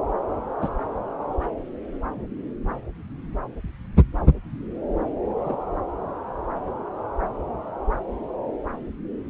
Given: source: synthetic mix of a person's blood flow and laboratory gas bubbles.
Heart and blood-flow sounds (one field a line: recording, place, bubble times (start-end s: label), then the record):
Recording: Doppler ultrasound of blood flow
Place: subclavian vein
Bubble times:
0.61-0.69 s: bubbles
5.45-5.56 s: bubbles
From the record:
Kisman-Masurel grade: 112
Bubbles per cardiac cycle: 1 to 2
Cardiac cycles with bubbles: 1 to 10%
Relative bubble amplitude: moderate (0.250 to 0.450)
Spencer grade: 1 (occasional bubble signal discernible with the cardiac motion signal, with majority of cardiac periods free of bubbles)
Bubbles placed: anywhere in the cardiac cycle